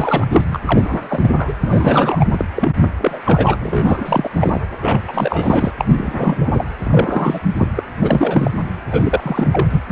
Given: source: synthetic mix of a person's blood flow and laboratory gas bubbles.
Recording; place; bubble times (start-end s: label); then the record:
Doppler ultrasound of blood flow; precordium
0.00-0.27 s: bubbles
0.30-0.57 s: bubbles
0.66-1.53 s: bubbles
1.61-2.25 s: bubbles
2.32-2.45 s: bubbles
2.55-2.72 s: bubbles
2.98-3.21 s: bubbles
3.25-3.56 s: bubbles
3.60-4.62 s: bubbles
4.82-5.00 s: bubbles
5.07-5.71 s: bubbles
5.79-6.64 s: bubbles
6.84-7.39 s: bubbles
7.57-7.67 s: bubbles
7.76-7.83 s: bubbles
8.01-8.50 s: bubbles
8.90-9.81 s: bubbles
9.89-9.92 s: bubbles
From the record:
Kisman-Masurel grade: 343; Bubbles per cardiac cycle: rolling drumbeat, 9 or more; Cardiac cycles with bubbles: 100%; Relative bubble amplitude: loud (0.450 to 0.775); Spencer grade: 3 (all of the cardiac periods contain showers or single bubble signals, but not dominating or overriding the cardiac motion signals); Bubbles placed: anywhere in the cardiac cycle